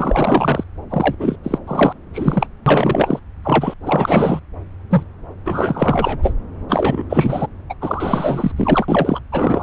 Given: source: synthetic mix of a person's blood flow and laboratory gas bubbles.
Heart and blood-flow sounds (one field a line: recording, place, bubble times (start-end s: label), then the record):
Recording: Doppler ultrasound of blood flow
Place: subclavian vein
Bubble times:
0.00-0.64 s: bubbles
0.90-1.15 s: bubbles
1.19-1.37 s: bubbles
1.44-1.58 s: bubbles
1.67-1.93 s: bubbles
2.13-2.47 s: bubbles
2.66-3.20 s: bubbles
3.44-3.74 s: bubbles
3.83-4.40 s: bubbles
4.90-5.04 s: bubbles
5.44-6.33 s: bubbles
6.68-7.03 s: bubbles
7.09-7.46 s: bubbles
7.69-7.74 s: bubbles
7.81-8.52 s: bubbles
8.56-9.20 s: bubbles
9.32-9.63 s: bubbles
From the record:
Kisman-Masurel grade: 444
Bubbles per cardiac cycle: continuous sound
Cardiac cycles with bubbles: 100%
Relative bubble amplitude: maximal (0.775 to 0.999)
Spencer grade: 4 (maximum detectable bubble signal sounding continuously throughout systole and diastole of every cardiac period, and overriding the amplitude of the normal cardiac signals)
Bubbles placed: anywhere in the cardiac cycle